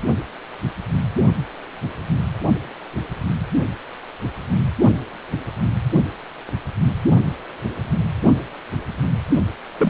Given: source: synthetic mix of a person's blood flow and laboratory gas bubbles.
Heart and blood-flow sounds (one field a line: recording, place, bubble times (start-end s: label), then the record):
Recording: Doppler ultrasound of blood flow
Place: precordium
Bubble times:
9.78-9.90 s: bubbles
From the record:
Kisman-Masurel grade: 122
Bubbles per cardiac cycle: 1 to 2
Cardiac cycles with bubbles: 10 to 50%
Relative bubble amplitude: moderate (0.250 to 0.450)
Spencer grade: 2 (many but less than half of the cardiac periods contain bubble signals, singularly or in groups)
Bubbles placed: only in the low amplitude regions of the cardiac cycle